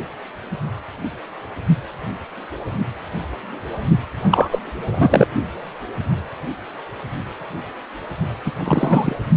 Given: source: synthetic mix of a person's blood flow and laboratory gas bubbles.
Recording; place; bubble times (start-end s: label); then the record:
Doppler ultrasound of blood flow; precordium
4.29-4.49 s: bubbles
4.51-4.59 s: bubbles
4.62-5.27 s: bubbles
8.45-8.52 s: bubbles
8.59-9.16 s: bubbles
From the record:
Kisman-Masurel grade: 223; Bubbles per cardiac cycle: several, 3 to 8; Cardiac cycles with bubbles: 10 to 50%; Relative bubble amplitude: loud (0.450 to 0.775); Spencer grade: 2 (many but less than half of the cardiac periods contain bubble signals, singularly or in groups); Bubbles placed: only in the low amplitude regions of the cardiac cycle